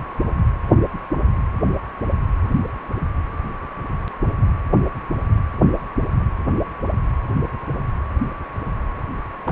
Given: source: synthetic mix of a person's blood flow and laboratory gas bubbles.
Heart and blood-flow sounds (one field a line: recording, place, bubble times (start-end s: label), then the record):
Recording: Doppler ultrasound of blood flow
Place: precordium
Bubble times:
9.45-9.52 s: bubbles
From the record:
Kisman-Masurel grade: 212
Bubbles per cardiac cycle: several, 3 to 8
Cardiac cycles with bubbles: 1 to 10%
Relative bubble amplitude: moderate (0.250 to 0.450)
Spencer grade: 1 (occasional bubble signal discernible with the cardiac motion signal, with majority of cardiac periods free of bubbles)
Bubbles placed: anywhere in the cardiac cycle